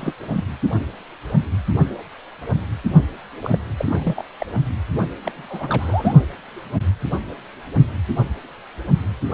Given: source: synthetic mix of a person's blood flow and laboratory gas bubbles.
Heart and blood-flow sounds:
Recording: Doppler ultrasound of blood flow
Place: precordium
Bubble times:
0.00-0.15 s: bubbles
0.33-0.44 s: bubbles
3.42-3.58 s: bubbles
3.77-4.24 s: bubbles
4.38-4.46 s: bubbles
5.24-6.14 s: bubbles
From the record:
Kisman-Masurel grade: 221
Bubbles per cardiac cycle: several, 3 to 8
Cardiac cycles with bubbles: 10 to 50%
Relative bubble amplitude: barely perceptible (0.100 to 0.250)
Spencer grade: 2 (many but less than half of the cardiac periods contain bubble signals, singularly or in groups)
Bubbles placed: only in the low amplitude regions of the cardiac cycle

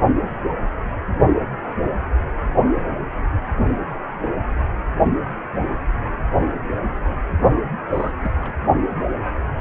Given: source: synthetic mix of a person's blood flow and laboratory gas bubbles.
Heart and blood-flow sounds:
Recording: Doppler ultrasound of blood flow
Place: precordium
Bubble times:
7.92-8.12 s: bubbles
8.21-8.31 s: bubbles
8.41-8.54 s: bubbles
From the record:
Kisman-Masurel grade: 211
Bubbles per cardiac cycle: several, 3 to 8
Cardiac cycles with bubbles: 1 to 10%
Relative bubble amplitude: barely perceptible (0.100 to 0.250)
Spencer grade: 1 (occasional bubble signal discernible with the cardiac motion signal, with majority of cardiac periods free of bubbles)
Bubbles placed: only in the low amplitude regions of the cardiac cycle

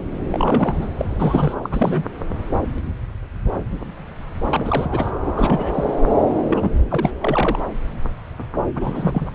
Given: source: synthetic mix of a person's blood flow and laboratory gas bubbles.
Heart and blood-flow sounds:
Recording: Doppler ultrasound of blood flow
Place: subclavian vein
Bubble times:
0.30-0.88 s: bubbles
0.99-1.05 s: bubbles
1.10-1.54 s: bubbles
1.62-2.11 s: bubbles
4.50-5.13 s: bubbles
5.26-5.93 s: bubbles
6.49-6.74 s: bubbles
6.90-7.11 s: bubbles
7.21-7.59 s: bubbles
8.75-9.30 s: bubbles
From the record:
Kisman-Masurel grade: 332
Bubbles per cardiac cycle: rolling drumbeat, 9 or more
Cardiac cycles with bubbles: 50 to 99%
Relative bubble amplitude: moderate (0.250 to 0.450)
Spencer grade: 3 (all of the cardiac periods contain showers or single bubble signals, but not dominating or overriding the cardiac motion signals)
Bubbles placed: anywhere in the cardiac cycle

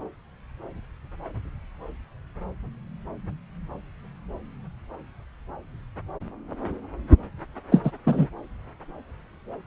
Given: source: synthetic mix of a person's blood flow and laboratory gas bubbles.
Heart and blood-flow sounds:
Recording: Doppler ultrasound of blood flow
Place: subclavian vein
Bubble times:
7.71-7.82 s: bubbles
7.84-7.91 s: bubbles
8.07-8.27 s: bubbles
From the record:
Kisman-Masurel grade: 223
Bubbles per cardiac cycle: several, 3 to 8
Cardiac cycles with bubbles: 10 to 50%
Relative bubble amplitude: loud (0.450 to 0.775)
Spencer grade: 2 (many but less than half of the cardiac periods contain bubble signals, singularly or in groups)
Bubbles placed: anywhere in the cardiac cycle

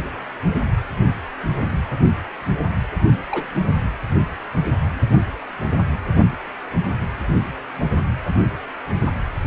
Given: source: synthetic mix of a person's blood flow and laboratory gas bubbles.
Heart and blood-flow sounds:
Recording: Doppler ultrasound of blood flow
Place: precordium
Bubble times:
3.07-3.19 s: bubbles
3.31-3.47 s: bubbles
From the record:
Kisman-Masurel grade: 111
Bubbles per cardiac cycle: 1 to 2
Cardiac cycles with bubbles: 1 to 10%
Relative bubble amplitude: barely perceptible (0.100 to 0.250)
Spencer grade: 1 (occasional bubble signal discernible with the cardiac motion signal, with majority of cardiac periods free of bubbles)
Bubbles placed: only in the low amplitude regions of the cardiac cycle

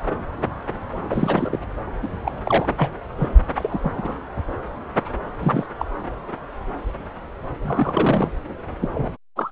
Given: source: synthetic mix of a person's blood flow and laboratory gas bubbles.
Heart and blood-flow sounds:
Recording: Doppler ultrasound of blood flow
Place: subclavian vein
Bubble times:
1.10-1.59 s: bubbles
2.02-2.07 s: bubbles
2.24-2.31 s: bubbles
2.44-2.88 s: bubbles
3.17-3.29 s: bubbles
3.55-4.19 s: bubbles
5.41-5.67 s: bubbles
5.79-5.85 s: bubbles
7.62-8.31 s: bubbles
8.81-8.89 s: bubbles
8.94-9.11 s: bubbles
9.36-9.51 s: bubbles
From the record:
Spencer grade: 3 (all of the cardiac periods contain showers or single bubble signals, but not dominating or overriding the cardiac motion signals)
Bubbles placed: anywhere in the cardiac cycle

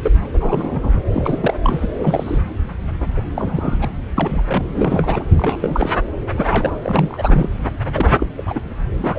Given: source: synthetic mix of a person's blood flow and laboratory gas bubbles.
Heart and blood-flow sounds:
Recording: Doppler ultrasound of blood flow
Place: subclavian vein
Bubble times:
0.02-0.11 s: bubbles
0.33-0.90 s: bubbles
1.13-1.54 s: bubbles
1.64-1.86 s: bubbles
1.99-2.38 s: bubbles
3.00-3.06 s: bubbles
3.16-3.22 s: bubbles
3.34-3.88 s: bubbles
4.17-4.42 s: bubbles
4.48-4.64 s: bubbles
4.74-5.23 s: bubbles
5.38-5.58 s: bubbles
5.61-5.90 s: bubbles
6.29-6.78 s: bubbles
6.82-7.50 s: bubbles
7.92-8.26 s: bubbles
8.38-8.41 s: bubbles
8.46-8.59 s: bubbles
8.98-9.19 s: bubbles
From the record:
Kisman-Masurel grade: 242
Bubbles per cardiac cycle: several, 3 to 8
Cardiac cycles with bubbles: 100%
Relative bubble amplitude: moderate (0.250 to 0.450)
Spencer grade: 3 (all of the cardiac periods contain showers or single bubble signals, but not dominating or overriding the cardiac motion signals)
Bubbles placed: anywhere in the cardiac cycle

